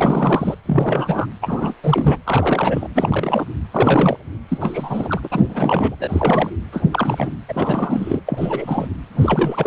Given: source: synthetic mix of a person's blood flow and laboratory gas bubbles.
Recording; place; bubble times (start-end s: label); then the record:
Doppler ultrasound of blood flow; precordium
0.00-0.55 s: bubbles
0.66-1.26 s: bubbles
1.41-1.74 s: bubbles
1.83-2.18 s: bubbles
2.24-2.88 s: bubbles
2.95-3.46 s: bubbles
3.71-4.17 s: bubbles
4.48-5.21 s: bubbles
5.23-5.29 s: bubbles
5.31-5.43 s: bubbles
5.50-5.96 s: bubbles
6.00-6.50 s: bubbles
6.72-6.83 s: bubbles
6.91-7.29 s: bubbles
7.48-8.20 s: bubbles
8.26-8.88 s: bubbles
9.15-9.67 s: bubbles
From the record:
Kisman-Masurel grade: 342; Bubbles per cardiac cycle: rolling drumbeat, 9 or more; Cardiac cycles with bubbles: 100%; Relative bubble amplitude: moderate (0.250 to 0.450); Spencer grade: 3 (all of the cardiac periods contain showers or single bubble signals, but not dominating or overriding the cardiac motion signals); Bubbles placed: anywhere in the cardiac cycle